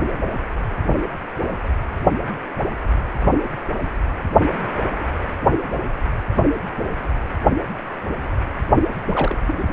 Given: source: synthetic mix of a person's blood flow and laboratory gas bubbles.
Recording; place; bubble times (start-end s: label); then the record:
Doppler ultrasound of blood flow; precordium
9.06-9.37 s: bubbles
9.47-9.64 s: bubbles
From the record:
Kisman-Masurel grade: 211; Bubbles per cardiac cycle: several, 3 to 8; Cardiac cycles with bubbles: 1 to 10%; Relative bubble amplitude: barely perceptible (0.100 to 0.250); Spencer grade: 1 (occasional bubble signal discernible with the cardiac motion signal, with majority of cardiac periods free of bubbles); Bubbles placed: only in the low amplitude regions of the cardiac cycle